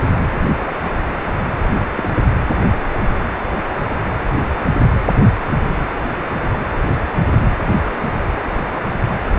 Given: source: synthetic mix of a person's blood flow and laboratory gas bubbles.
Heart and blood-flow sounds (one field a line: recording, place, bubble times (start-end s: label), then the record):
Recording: Doppler ultrasound of blood flow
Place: precordium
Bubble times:
1.96-2.10 s: bubbles
From the record:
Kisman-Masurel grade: 111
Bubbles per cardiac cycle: 1 to 2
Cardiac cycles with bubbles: 1 to 10%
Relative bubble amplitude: barely perceptible (0.100 to 0.250)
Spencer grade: 1 (occasional bubble signal discernible with the cardiac motion signal, with majority of cardiac periods free of bubbles)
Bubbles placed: anywhere in the cardiac cycle